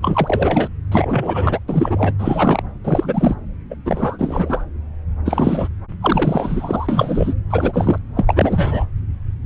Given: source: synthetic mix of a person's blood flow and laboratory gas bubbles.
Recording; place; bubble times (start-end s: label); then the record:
Doppler ultrasound of blood flow; subclavian vein
0.02-0.69 s: bubbles
0.92-1.59 s: bubbles
1.68-2.14 s: bubbles
2.19-2.63 s: bubbles
2.84-3.35 s: bubbles
3.70-3.75 s: bubbles
3.85-4.64 s: bubbles
5.25-5.68 s: bubbles
6.00-7.34 s: bubbles
7.50-7.98 s: bubbles
8.16-8.86 s: bubbles
From the record:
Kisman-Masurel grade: 333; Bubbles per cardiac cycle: rolling drumbeat, 9 or more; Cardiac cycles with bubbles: 50 to 99%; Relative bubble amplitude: loud (0.450 to 0.775); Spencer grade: 3 (all of the cardiac periods contain showers or single bubble signals, but not dominating or overriding the cardiac motion signals); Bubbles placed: anywhere in the cardiac cycle